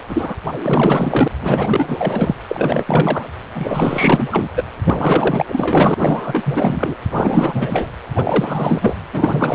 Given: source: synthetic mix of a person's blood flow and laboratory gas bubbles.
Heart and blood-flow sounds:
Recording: Doppler ultrasound of blood flow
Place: precordium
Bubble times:
0.07-0.36 s: bubbles
0.60-1.28 s: bubbles
1.41-2.35 s: bubbles
2.48-3.28 s: bubbles
3.54-4.49 s: bubbles
4.55-4.64 s: bubbles
4.84-5.46 s: bubbles
5.52-5.94 s: bubbles
5.98-6.94 s: bubbles
7.10-7.87 s: bubbles
8.16-8.96 s: bubbles
9.13-9.55 s: bubbles
From the record:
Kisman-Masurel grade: 444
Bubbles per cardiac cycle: continuous sound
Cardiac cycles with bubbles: 100%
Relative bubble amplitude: maximal (0.775 to 0.999)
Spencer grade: 4 (maximum detectable bubble signal sounding continuously throughout systole and diastole of every cardiac period, and overriding the amplitude of the normal cardiac signals)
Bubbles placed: anywhere in the cardiac cycle

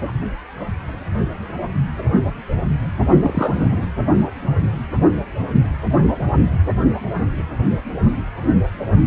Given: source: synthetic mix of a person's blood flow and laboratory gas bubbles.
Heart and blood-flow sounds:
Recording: Doppler ultrasound of blood flow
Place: precordium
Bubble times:
3.21-3.87 s: bubbles
From the record:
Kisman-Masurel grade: 212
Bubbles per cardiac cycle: several, 3 to 8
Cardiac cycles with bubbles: 1 to 10%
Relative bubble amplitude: moderate (0.250 to 0.450)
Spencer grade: 1 (occasional bubble signal discernible with the cardiac motion signal, with majority of cardiac periods free of bubbles)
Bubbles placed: only in the low amplitude regions of the cardiac cycle

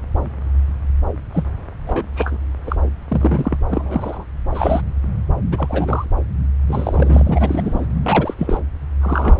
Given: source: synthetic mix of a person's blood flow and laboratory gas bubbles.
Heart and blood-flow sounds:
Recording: Doppler ultrasound of blood flow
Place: subclavian vein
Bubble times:
1.33-1.44 s: bubbles
1.87-2.03 s: bubbles
2.15-2.37 s: bubbles
2.66-2.76 s: bubbles
3.08-3.57 s: bubbles
3.70-4.24 s: bubbles
4.54-4.81 s: bubbles
5.51-6.05 s: bubbles
6.67-7.87 s: bubbles
8.03-8.34 s: bubbles
8.38-8.59 s: bubbles
9.01-9.40 s: bubbles
From the record:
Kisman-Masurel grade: 232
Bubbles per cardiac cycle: several, 3 to 8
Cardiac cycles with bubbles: 50 to 99%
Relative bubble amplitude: moderate (0.250 to 0.450)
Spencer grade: 3 (all of the cardiac periods contain showers or single bubble signals, but not dominating or overriding the cardiac motion signals)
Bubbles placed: anywhere in the cardiac cycle

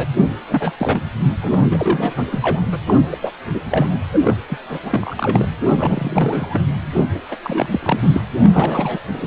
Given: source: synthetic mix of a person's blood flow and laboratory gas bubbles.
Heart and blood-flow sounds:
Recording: Doppler ultrasound of blood flow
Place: precordium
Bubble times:
0.00-0.07 s: bubbles
0.49-0.73 s: bubbles
0.77-1.06 s: bubbles
1.42-1.58 s: bubbles
1.71-2.25 s: bubbles
2.31-2.39 s: bubbles
2.42-2.61 s: bubbles
2.71-2.79 s: bubbles
2.86-2.96 s: bubbles
3.11-3.17 s: bubbles
3.21-3.31 s: bubbles
3.53-3.62 s: bubbles
3.70-3.98 s: bubbles
4.12-4.20 s: bubbles
4.24-4.37 s: bubbles
4.49-4.58 s: bubbles
4.69-5.47 s: bubbles
5.76-6.62 s: bubbles
6.94-7.03 s: bubbles
7.14-7.21 s: bubbles
7.31-7.36 s: bubbles
7.43-8.22 s: bubbles
8.41-9.01 s: bubbles
9.13-9.27 s: bubbles
From the record:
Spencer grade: 3 (all of the cardiac periods contain showers or single bubble signals, but not dominating or overriding the cardiac motion signals)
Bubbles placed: anywhere in the cardiac cycle

